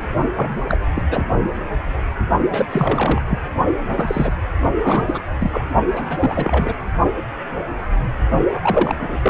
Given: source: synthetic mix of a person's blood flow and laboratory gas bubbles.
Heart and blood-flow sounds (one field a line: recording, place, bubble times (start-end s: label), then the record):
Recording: Doppler ultrasound of blood flow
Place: precordium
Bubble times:
0.36-0.54 s: bubbles
0.69-0.77 s: bubbles
0.95-1.02 s: bubbles
1.10-1.24 s: bubbles
2.50-2.66 s: bubbles
2.69-3.22 s: bubbles
3.29-3.40 s: bubbles
3.77-4.33 s: bubbles
4.82-5.22 s: bubbles
5.40-5.67 s: bubbles
5.96-6.75 s: bubbles
8.48-8.93 s: bubbles
9.00-9.18 s: bubbles
9.23-9.30 s: bubbles
From the record:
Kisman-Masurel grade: 332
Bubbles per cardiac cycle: rolling drumbeat, 9 or more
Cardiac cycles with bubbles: 50 to 99%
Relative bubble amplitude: moderate (0.250 to 0.450)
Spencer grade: 3 (all of the cardiac periods contain showers or single bubble signals, but not dominating or overriding the cardiac motion signals)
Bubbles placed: only in the low amplitude regions of the cardiac cycle